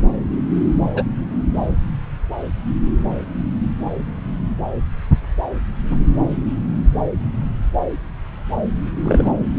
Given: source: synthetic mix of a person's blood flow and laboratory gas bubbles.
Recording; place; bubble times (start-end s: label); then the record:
Doppler ultrasound of blood flow; subclavian vein
0.94-1.03 s: bubbles
5.91-5.98 s: bubbles
9.04-9.32 s: bubbles
From the record:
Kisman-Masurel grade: 122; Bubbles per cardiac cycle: 1 to 2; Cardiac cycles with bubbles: 10 to 50%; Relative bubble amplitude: moderate (0.250 to 0.450); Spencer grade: 2 (many but less than half of the cardiac periods contain bubble signals, singularly or in groups); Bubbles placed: anywhere in the cardiac cycle